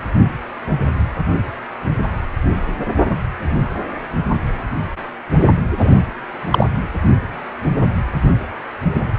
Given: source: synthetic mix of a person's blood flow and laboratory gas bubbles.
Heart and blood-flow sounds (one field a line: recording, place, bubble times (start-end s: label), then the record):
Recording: Doppler ultrasound of blood flow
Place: precordium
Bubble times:
5.79-5.92 s: bubbles
6.50-6.67 s: bubbles
From the record:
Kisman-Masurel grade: 113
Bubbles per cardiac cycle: 1 to 2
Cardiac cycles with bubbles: 1 to 10%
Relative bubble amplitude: loud (0.450 to 0.775)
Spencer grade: 1 (occasional bubble signal discernible with the cardiac motion signal, with majority of cardiac periods free of bubbles)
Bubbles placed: anywhere in the cardiac cycle